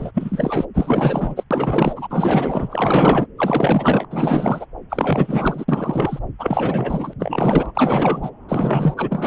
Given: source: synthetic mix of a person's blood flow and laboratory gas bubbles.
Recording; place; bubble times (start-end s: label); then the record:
Doppler ultrasound of blood flow; subclavian vein
0.00-0.11 s: bubbles
0.14-0.65 s: bubbles
0.74-1.44 s: bubbles
1.50-3.27 s: bubbles
3.38-4.05 s: bubbles
4.10-4.66 s: bubbles
4.89-5.65 s: bubbles
5.68-6.20 s: bubbles
6.38-7.13 s: bubbles
7.20-7.72 s: bubbles
7.75-8.30 s: bubbles
8.49-8.94 s: bubbles
8.97-9.27 s: bubbles
From the record:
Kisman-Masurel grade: 444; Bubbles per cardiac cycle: continuous sound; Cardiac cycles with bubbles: 100%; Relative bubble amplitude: maximal (0.775 to 0.999); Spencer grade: 4 (maximum detectable bubble signal sounding continuously throughout systole and diastole of every cardiac period, and overriding the amplitude of the normal cardiac signals); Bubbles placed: anywhere in the cardiac cycle